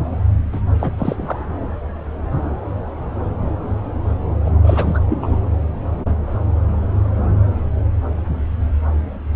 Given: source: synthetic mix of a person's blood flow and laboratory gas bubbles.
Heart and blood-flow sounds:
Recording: Doppler ultrasound of blood flow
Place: subclavian vein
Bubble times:
0.52-0.60 s: bubbles
0.79-0.91 s: bubbles
0.97-1.43 s: bubbles
4.45-4.50 s: bubbles
4.63-4.99 s: bubbles
5.09-5.50 s: bubbles
From the record:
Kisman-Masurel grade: 222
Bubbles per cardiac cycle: several, 3 to 8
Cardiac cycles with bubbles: 10 to 50%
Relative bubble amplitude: moderate (0.250 to 0.450)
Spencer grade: 2 (many but less than half of the cardiac periods contain bubble signals, singularly or in groups)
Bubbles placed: anywhere in the cardiac cycle

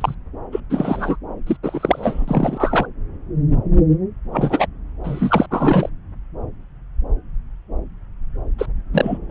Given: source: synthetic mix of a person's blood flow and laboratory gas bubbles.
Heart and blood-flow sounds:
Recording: Doppler ultrasound of blood flow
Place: subclavian vein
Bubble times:
0.01-0.14 s: bubbles
0.52-0.60 s: bubbles
0.70-1.18 s: bubbles
1.47-1.57 s: bubbles
1.63-2.87 s: bubbles
4.32-4.67 s: bubbles
5.04-5.46 s: bubbles
5.50-5.90 s: bubbles
8.58-8.66 s: bubbles
8.93-9.18 s: bubbles
9.29-9.31 s: bubbles
From the record:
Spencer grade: 3 (all of the cardiac periods contain showers or single bubble signals, but not dominating or overriding the cardiac motion signals)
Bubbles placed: anywhere in the cardiac cycle

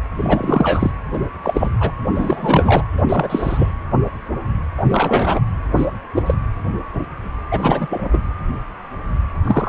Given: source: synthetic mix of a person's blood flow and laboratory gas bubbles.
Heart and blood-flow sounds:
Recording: Doppler ultrasound of blood flow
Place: precordium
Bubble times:
0.17-0.91 s: bubbles
1.14-1.19 s: bubbles
1.43-1.71 s: bubbles
1.80-1.92 s: bubbles
2.15-2.83 s: bubbles
2.98-3.02 s: bubbles
3.08-3.72 s: bubbles
4.78-4.84 s: bubbles
4.89-5.40 s: bubbles
5.76-5.86 s: bubbles
6.15-6.34 s: bubbles
7.51-7.87 s: bubbles
7.90-8.20 s: bubbles
9.44-9.69 s: bubbles
From the record:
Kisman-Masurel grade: 233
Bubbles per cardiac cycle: several, 3 to 8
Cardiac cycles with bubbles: 50 to 99%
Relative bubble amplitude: loud (0.450 to 0.775)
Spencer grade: 3 (all of the cardiac periods contain showers or single bubble signals, but not dominating or overriding the cardiac motion signals)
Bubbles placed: anywhere in the cardiac cycle

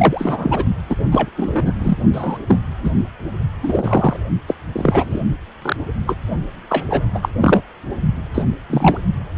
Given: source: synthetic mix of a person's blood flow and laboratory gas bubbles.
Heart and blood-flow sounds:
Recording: Doppler ultrasound of blood flow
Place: precordium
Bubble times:
0.00-0.65 s: bubbles
0.89-0.96 s: bubbles
1.11-1.29 s: bubbles
1.36-1.72 s: bubbles
1.80-1.97 s: bubbles
2.12-2.38 s: bubbles
2.48-2.58 s: bubbles
2.83-2.91 s: bubbles
3.62-4.17 s: bubbles
4.47-4.54 s: bubbles
4.72-5.22 s: bubbles
5.62-5.76 s: bubbles
6.06-6.15 s: bubbles
6.69-6.84 s: bubbles
6.90-7.02 s: bubbles
7.14-7.19 s: bubbles
7.22-7.29 s: bubbles
7.41-7.61 s: bubbles
8.34-8.42 s: bubbles
8.70-8.98 s: bubbles
From the record:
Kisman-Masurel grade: 243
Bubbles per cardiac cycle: several, 3 to 8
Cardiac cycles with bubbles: 100%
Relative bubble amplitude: loud (0.450 to 0.775)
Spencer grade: 3 (all of the cardiac periods contain showers or single bubble signals, but not dominating or overriding the cardiac motion signals)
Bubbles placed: only in the low amplitude regions of the cardiac cycle

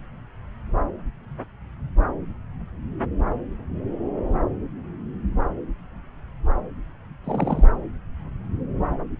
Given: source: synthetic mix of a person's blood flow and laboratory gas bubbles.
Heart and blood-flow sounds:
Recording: Doppler ultrasound of blood flow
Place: subclavian vein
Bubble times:
7.24-7.64 s: bubbles
From the record:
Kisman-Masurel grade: 112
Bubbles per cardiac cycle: 1 to 2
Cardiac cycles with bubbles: 1 to 10%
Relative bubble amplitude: moderate (0.250 to 0.450)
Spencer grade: 1 (occasional bubble signal discernible with the cardiac motion signal, with majority of cardiac periods free of bubbles)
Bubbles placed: anywhere in the cardiac cycle

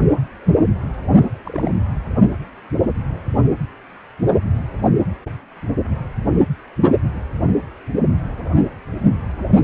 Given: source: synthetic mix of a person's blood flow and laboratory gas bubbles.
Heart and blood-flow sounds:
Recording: Doppler ultrasound of blood flow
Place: precordium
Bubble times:
1.45-1.71 s: bubbles
From the record:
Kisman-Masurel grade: 111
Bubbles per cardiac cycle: 1 to 2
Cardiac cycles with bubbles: 1 to 10%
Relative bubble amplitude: barely perceptible (0.100 to 0.250)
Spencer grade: 1 (occasional bubble signal discernible with the cardiac motion signal, with majority of cardiac periods free of bubbles)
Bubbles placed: anywhere in the cardiac cycle

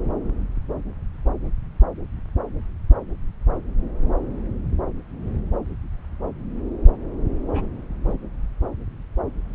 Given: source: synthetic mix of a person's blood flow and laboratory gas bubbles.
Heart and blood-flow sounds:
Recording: Doppler ultrasound of blood flow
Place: subclavian vein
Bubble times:
7.52-7.67 s: bubbles
8.04-8.13 s: bubbles
From the record:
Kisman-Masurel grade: 111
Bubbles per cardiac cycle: 1 to 2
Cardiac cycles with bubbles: 1 to 10%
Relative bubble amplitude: barely perceptible (0.100 to 0.250)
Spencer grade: 1 (occasional bubble signal discernible with the cardiac motion signal, with majority of cardiac periods free of bubbles)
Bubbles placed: anywhere in the cardiac cycle

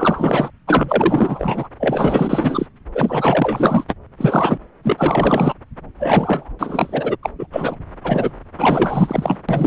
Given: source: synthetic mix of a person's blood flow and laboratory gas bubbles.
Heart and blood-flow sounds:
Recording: Doppler ultrasound of blood flow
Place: subclavian vein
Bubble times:
0.00-0.51 s: bubbles
0.67-1.68 s: bubbles
1.80-2.67 s: bubbles
2.94-3.84 s: bubbles
4.18-4.58 s: bubbles
4.83-5.54 s: bubbles
6.00-6.51 s: bubbles
6.59-7.17 s: bubbles
7.23-7.29 s: bubbles
7.39-7.46 s: bubbles
7.52-7.77 s: bubbles
8.04-8.30 s: bubbles
8.58-9.36 s: bubbles
9.48-9.67 s: bubbles
From the record:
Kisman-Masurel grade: 444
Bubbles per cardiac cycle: continuous sound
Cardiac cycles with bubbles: 100%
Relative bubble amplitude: maximal (0.775 to 0.999)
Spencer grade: 4 (maximum detectable bubble signal sounding continuously throughout systole and diastole of every cardiac period, and overriding the amplitude of the normal cardiac signals)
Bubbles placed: anywhere in the cardiac cycle

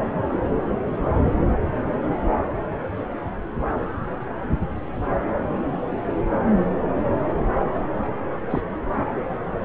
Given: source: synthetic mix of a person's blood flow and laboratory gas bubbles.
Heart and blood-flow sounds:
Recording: Doppler ultrasound of blood flow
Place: subclavian vein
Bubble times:
8.50-8.62 s: bubbles
From the record:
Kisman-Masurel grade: 111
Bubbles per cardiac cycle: 1 to 2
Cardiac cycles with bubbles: 1 to 10%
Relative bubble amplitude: barely perceptible (0.100 to 0.250)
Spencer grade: 1 (occasional bubble signal discernible with the cardiac motion signal, with majority of cardiac periods free of bubbles)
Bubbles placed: anywhere in the cardiac cycle

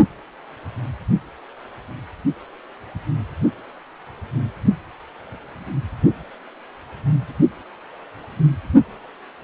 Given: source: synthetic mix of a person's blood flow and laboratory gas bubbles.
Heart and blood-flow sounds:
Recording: Doppler ultrasound of blood flow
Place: precordium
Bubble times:
no bubbles
From the record:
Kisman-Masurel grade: 000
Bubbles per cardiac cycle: 0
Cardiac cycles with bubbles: 0%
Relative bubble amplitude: no bubbles discernible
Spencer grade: 0 (complete lack of bubble signals)

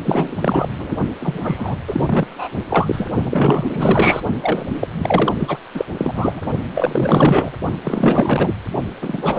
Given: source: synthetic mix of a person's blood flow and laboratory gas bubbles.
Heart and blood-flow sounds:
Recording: Doppler ultrasound of blood flow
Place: precordium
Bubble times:
0.06-0.36 s: bubbles
0.41-0.68 s: bubbles
0.78-0.96 s: bubbles
1.20-1.76 s: bubbles
1.88-2.27 s: bubbles
2.29-2.65 s: bubbles
2.70-3.09 s: bubbles
3.22-4.21 s: bubbles
4.41-4.89 s: bubbles
4.97-5.58 s: bubbles
5.74-5.85 s: bubbles
5.95-6.42 s: bubbles
6.75-7.52 s: bubbles
7.84-8.54 s: bubbles
9.01-9.39 s: bubbles
From the record:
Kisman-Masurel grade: 444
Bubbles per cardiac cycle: continuous sound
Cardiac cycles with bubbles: 100%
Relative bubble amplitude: maximal (0.775 to 0.999)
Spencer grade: 4 (maximum detectable bubble signal sounding continuously throughout systole and diastole of every cardiac period, and overriding the amplitude of the normal cardiac signals)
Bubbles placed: only in the low amplitude regions of the cardiac cycle

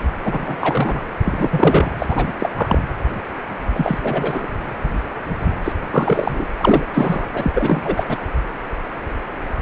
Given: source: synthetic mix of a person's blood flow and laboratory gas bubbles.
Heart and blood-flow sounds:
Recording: Doppler ultrasound of blood flow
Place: precordium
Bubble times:
0.24-1.04 s: bubbles
1.23-1.92 s: bubbles
1.98-2.33 s: bubbles
2.38-2.50 s: bubbles
2.56-2.79 s: bubbles
3.75-3.98 s: bubbles
4.03-4.47 s: bubbles
5.64-5.72 s: bubbles
5.91-6.45 s: bubbles
6.58-6.85 s: bubbles
6.94-7.28 s: bubbles
7.33-8.18 s: bubbles
From the record:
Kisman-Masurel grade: 333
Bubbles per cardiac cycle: rolling drumbeat, 9 or more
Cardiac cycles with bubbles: 50 to 99%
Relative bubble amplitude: loud (0.450 to 0.775)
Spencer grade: 3 (all of the cardiac periods contain showers or single bubble signals, but not dominating or overriding the cardiac motion signals)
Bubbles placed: anywhere in the cardiac cycle

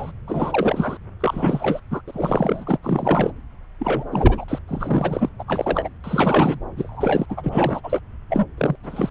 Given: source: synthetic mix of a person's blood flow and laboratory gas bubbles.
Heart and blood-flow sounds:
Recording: Doppler ultrasound of blood flow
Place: subclavian vein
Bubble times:
0.00-0.12 s: bubbles
0.27-0.97 s: bubbles
1.20-1.80 s: bubbles
1.90-2.02 s: bubbles
2.07-2.77 s: bubbles
2.82-3.31 s: bubbles
3.79-4.05 s: bubbles
4.12-4.45 s: bubbles
4.48-4.59 s: bubbles
4.67-5.29 s: bubbles
5.38-5.43 s: bubbles
5.47-5.88 s: bubbles
6.04-6.58 s: bubbles
6.76-7.26 s: bubbles
7.29-7.80 s: bubbles
7.83-8.01 s: bubbles
8.29-8.45 s: bubbles
8.57-8.76 s: bubbles
8.83-9.10 s: bubbles
From the record:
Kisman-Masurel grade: 332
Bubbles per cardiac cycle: rolling drumbeat, 9 or more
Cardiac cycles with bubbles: 50 to 99%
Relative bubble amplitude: moderate (0.250 to 0.450)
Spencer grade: 3 (all of the cardiac periods contain showers or single bubble signals, but not dominating or overriding the cardiac motion signals)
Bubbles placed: anywhere in the cardiac cycle

